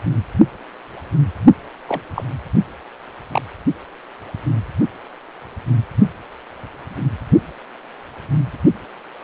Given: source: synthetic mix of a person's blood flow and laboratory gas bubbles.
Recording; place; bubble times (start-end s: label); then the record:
Doppler ultrasound of blood flow; precordium
1.88-2.02 s: bubbles
2.15-2.24 s: bubbles
3.31-3.42 s: bubbles
From the record:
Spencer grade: 2 (many but less than half of the cardiac periods contain bubble signals, singularly or in groups); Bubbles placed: only in the low amplitude regions of the cardiac cycle